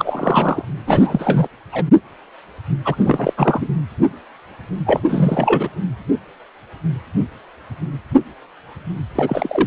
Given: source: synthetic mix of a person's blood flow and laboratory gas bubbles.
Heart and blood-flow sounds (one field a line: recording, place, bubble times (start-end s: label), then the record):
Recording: Doppler ultrasound of blood flow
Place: precordium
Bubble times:
0.00-0.65 s: bubbles
0.86-1.48 s: bubbles
1.71-1.83 s: bubbles
2.84-3.33 s: bubbles
3.37-3.67 s: bubbles
4.85-5.00 s: bubbles
5.08-5.70 s: bubbles
9.15-9.66 s: bubbles
From the record:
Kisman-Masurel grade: 333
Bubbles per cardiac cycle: rolling drumbeat, 9 or more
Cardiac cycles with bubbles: 50 to 99%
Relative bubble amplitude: loud (0.450 to 0.775)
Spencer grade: 3 (all of the cardiac periods contain showers or single bubble signals, but not dominating or overriding the cardiac motion signals)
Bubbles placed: anywhere in the cardiac cycle